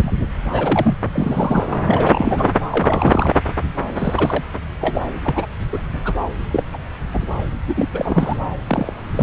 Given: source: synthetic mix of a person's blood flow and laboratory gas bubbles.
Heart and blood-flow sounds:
Doppler ultrasound of blood flow; subclavian vein
0.00-0.25 s: bubbles
0.52-0.97 s: bubbles
1.12-1.67 s: bubbles
1.86-2.49 s: bubbles
2.71-3.35 s: bubbles
3.96-4.43 s: bubbles
4.80-5.01 s: bubbles
5.24-5.46 s: bubbles
5.72-5.84 s: bubbles
5.93-6.01 s: bubbles
6.04-6.13 s: bubbles
6.51-6.64 s: bubbles
6.72-6.78 s: bubbles
7.13-7.19 s: bubbles
7.67-7.86 s: bubbles
7.93-8.40 s: bubbles
8.67-8.93 s: bubbles
9.16-9.22 s: bubbles
From the record:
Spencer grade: 3 (all of the cardiac periods contain showers or single bubble signals, but not dominating or overriding the cardiac motion signals); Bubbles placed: anywhere in the cardiac cycle

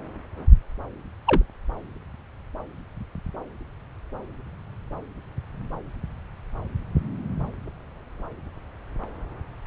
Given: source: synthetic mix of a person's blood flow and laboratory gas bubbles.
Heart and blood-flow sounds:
Doppler ultrasound of blood flow; subclavian vein
1.24-1.42 s: bubbles
From the record:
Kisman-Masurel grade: 112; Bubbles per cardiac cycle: 1 to 2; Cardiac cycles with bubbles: 1 to 10%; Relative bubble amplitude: moderate (0.250 to 0.450); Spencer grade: 1 (occasional bubble signal discernible with the cardiac motion signal, with majority of cardiac periods free of bubbles); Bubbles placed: anywhere in the cardiac cycle

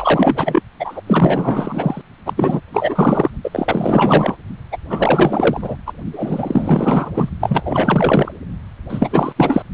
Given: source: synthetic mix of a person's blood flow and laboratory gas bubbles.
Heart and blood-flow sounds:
Doppler ultrasound of blood flow; precordium
0.00-0.60 s: bubbles
0.79-1.01 s: bubbles
1.06-2.02 s: bubbles
2.25-2.33 s: bubbles
2.36-2.60 s: bubbles
2.73-3.30 s: bubbles
3.44-4.37 s: bubbles
4.71-4.77 s: bubbles
4.90-5.76 s: bubbles
5.86-5.92 s: bubbles
6.12-7.09 s: bubbles
7.14-7.29 s: bubbles
7.41-8.32 s: bubbles
8.89-9.34 s: bubbles
9.36-9.62 s: bubbles
From the record:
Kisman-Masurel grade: 444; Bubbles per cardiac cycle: continuous sound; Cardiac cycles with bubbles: 100%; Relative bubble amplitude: maximal (0.775 to 0.999); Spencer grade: 4 (maximum detectable bubble signal sounding continuously throughout systole and diastole of every cardiac period, and overriding the amplitude of the normal cardiac signals); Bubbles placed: only in the low amplitude regions of the cardiac cycle

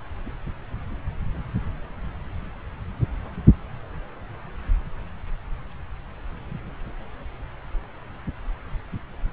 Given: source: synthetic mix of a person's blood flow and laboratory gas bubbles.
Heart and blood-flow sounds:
Doppler ultrasound of blood flow; subclavian vein
no bubbles
From the record:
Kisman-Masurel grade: 000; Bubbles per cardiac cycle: 0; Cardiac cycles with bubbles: 0%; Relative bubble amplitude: no bubbles discernible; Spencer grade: 0 (complete lack of bubble signals)

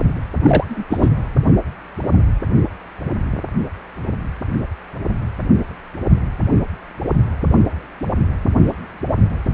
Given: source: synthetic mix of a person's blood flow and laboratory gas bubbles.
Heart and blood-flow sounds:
Doppler ultrasound of blood flow; precordium
0.43-0.65 s: bubbles
0.68-0.84 s: bubbles
0.90-1.09 s: bubbles
From the record:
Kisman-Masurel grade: 213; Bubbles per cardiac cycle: several, 3 to 8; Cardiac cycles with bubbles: 1 to 10%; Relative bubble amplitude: loud (0.450 to 0.775); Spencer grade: 1 (occasional bubble signal discernible with the cardiac motion signal, with majority of cardiac periods free of bubbles); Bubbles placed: anywhere in the cardiac cycle

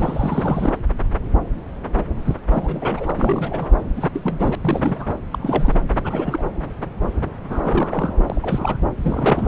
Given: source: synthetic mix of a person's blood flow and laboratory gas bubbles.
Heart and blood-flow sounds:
Doppler ultrasound of blood flow; subclavian vein
0.00-0.77 s: bubbles
2.25-2.36 s: bubbles
2.50-3.12 s: bubbles
3.15-3.67 s: bubbles
3.96-4.10 s: bubbles
4.13-4.55 s: bubbles
4.60-5.06 s: bubbles
5.31-5.77 s: bubbles
5.96-6.01 s: bubbles
6.04-6.47 s: bubbles
7.50-8.12 s: bubbles
8.17-8.23 s: bubbles
8.29-8.77 s: bubbles
9.02-9.48 s: bubbles
From the record:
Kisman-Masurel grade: 332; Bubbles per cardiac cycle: rolling drumbeat, 9 or more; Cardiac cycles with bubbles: 50 to 99%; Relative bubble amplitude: moderate (0.250 to 0.450); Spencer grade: 3 (all of the cardiac periods contain showers or single bubble signals, but not dominating or overriding the cardiac motion signals); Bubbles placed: anywhere in the cardiac cycle

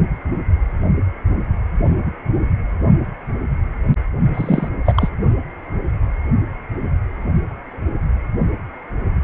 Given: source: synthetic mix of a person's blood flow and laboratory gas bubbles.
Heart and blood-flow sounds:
Doppler ultrasound of blood flow; precordium
4.34-4.68 s: bubbles
4.84-5.09 s: bubbles
From the record:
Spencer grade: 2 (many but less than half of the cardiac periods contain bubble signals, singularly or in groups); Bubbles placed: only in the low amplitude regions of the cardiac cycle

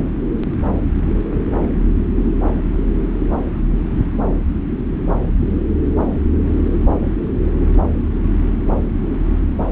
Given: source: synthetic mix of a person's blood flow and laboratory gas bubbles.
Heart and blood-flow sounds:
Doppler ultrasound of blood flow; subclavian vein
no bubbles
From the record:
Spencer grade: 0 (complete lack of bubble signals)

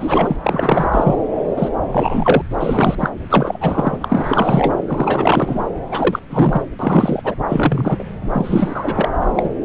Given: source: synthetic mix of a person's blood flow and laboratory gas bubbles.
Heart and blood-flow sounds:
Doppler ultrasound of blood flow; subclavian vein
0.00-0.36 s: bubbles
0.44-1.16 s: bubbles
1.57-1.69 s: bubbles
1.92-2.42 s: bubbles
2.60-2.96 s: bubbles
3.00-3.10 s: bubbles
3.30-3.97 s: bubbles
4.00-4.75 s: bubbles
4.87-5.60 s: bubbles
5.91-6.19 s: bubbles
6.29-6.62 s: bubbles
6.79-7.35 s: bubbles
7.48-8.04 s: bubbles
8.32-9.09 s: bubbles
9.35-9.50 s: bubbles
From the record:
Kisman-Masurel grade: 333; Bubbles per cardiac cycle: rolling drumbeat, 9 or more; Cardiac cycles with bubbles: 50 to 99%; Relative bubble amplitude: loud (0.450 to 0.775); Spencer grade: 3 (all of the cardiac periods contain showers or single bubble signals, but not dominating or overriding the cardiac motion signals); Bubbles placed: anywhere in the cardiac cycle

